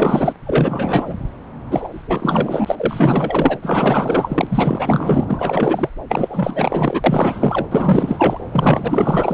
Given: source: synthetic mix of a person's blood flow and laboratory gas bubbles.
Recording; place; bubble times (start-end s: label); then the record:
Doppler ultrasound of blood flow; subclavian vein
0.00-0.33 s: bubbles
0.45-1.15 s: bubbles
1.71-1.88 s: bubbles
1.92-3.58 s: bubbles
3.62-5.25 s: bubbles
5.28-5.89 s: bubbles
6.08-7.02 s: bubbles
7.04-7.67 s: bubbles
7.71-8.38 s: bubbles
8.51-9.34 s: bubbles
From the record:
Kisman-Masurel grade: 444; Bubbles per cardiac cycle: continuous sound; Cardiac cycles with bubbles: 100%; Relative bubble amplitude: maximal (0.775 to 0.999); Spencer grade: 4 (maximum detectable bubble signal sounding continuously throughout systole and diastole of every cardiac period, and overriding the amplitude of the normal cardiac signals); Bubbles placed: anywhere in the cardiac cycle